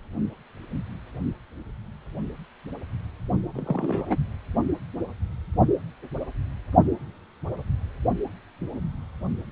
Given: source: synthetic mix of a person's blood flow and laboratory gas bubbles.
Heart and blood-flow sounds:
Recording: Doppler ultrasound of blood flow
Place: precordium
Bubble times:
3.55-4.17 s: bubbles
From the record:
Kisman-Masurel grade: 112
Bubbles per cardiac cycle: 1 to 2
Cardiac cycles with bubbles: 1 to 10%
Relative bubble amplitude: moderate (0.250 to 0.450)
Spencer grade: 1 (occasional bubble signal discernible with the cardiac motion signal, with majority of cardiac periods free of bubbles)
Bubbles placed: only in the low amplitude regions of the cardiac cycle

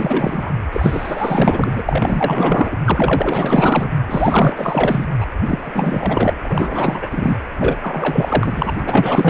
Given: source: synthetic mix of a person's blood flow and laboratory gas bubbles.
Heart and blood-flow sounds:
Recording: Doppler ultrasound of blood flow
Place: precordium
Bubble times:
0.00-0.58 s: bubbles
0.73-1.83 s: bubbles
1.88-2.79 s: bubbles
2.85-3.92 s: bubbles
4.07-5.08 s: bubbles
5.20-5.26 s: bubbles
5.42-6.34 s: bubbles
6.43-7.38 s: bubbles
7.60-7.77 s: bubbles
7.82-8.75 s: bubbles
8.77-9.29 s: bubbles
From the record:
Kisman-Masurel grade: 444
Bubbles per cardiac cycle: continuous sound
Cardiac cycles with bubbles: 100%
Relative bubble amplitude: maximal (0.775 to 0.999)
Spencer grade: 4 (maximum detectable bubble signal sounding continuously throughout systole and diastole of every cardiac period, and overriding the amplitude of the normal cardiac signals)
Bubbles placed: anywhere in the cardiac cycle

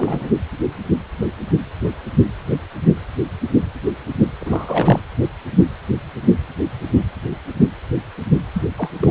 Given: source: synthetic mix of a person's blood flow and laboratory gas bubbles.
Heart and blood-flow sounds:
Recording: Doppler ultrasound of blood flow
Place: precordium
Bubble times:
0.00-0.29 s: bubbles
4.41-5.00 s: bubbles
8.54-8.63 s: bubbles
8.77-8.90 s: bubbles
9.00-9.11 s: bubbles
From the record:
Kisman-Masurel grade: 222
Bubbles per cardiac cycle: several, 3 to 8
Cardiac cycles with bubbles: 10 to 50%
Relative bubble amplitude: moderate (0.250 to 0.450)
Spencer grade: 2 (many but less than half of the cardiac periods contain bubble signals, singularly or in groups)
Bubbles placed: anywhere in the cardiac cycle

